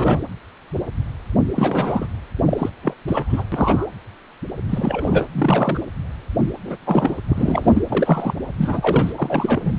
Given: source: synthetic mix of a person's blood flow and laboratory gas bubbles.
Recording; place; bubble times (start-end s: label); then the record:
Doppler ultrasound of blood flow; precordium
0.00-0.20 s: bubbles
1.55-2.07 s: bubbles
2.45-2.70 s: bubbles
2.83-2.94 s: bubbles
3.07-3.45 s: bubbles
3.52-3.87 s: bubbles
4.69-5.27 s: bubbles
5.32-5.83 s: bubbles
6.65-6.77 s: bubbles
6.81-7.25 s: bubbles
7.29-7.83 s: bubbles
7.89-8.34 s: bubbles
8.57-9.12 s: bubbles
9.16-9.73 s: bubbles
From the record:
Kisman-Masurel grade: 333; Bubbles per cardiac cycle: rolling drumbeat, 9 or more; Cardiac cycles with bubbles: 50 to 99%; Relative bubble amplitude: loud (0.450 to 0.775); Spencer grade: 3 (all of the cardiac periods contain showers or single bubble signals, but not dominating or overriding the cardiac motion signals); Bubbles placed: anywhere in the cardiac cycle